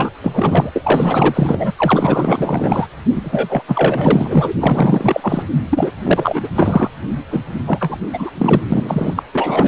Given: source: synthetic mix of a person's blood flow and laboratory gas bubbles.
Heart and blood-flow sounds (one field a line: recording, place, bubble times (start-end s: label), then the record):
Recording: Doppler ultrasound of blood flow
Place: precordium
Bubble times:
0.00-0.10 s: bubbles
0.23-0.71 s: bubbles
0.75-1.71 s: bubbles
1.77-2.88 s: bubbles
3.15-3.62 s: bubbles
3.68-4.54 s: bubbles
4.59-5.42 s: bubbles
5.71-5.92 s: bubbles
6.03-6.49 s: bubbles
6.55-6.91 s: bubbles
7.30-7.41 s: bubbles
7.66-7.98 s: bubbles
8.13-8.30 s: bubbles
8.38-8.61 s: bubbles
8.69-9.23 s: bubbles
9.33-9.68 s: bubbles
From the record:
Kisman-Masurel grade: 444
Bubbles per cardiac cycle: continuous sound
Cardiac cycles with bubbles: 100%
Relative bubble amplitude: maximal (0.775 to 0.999)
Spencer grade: 4 (maximum detectable bubble signal sounding continuously throughout systole and diastole of every cardiac period, and overriding the amplitude of the normal cardiac signals)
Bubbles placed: anywhere in the cardiac cycle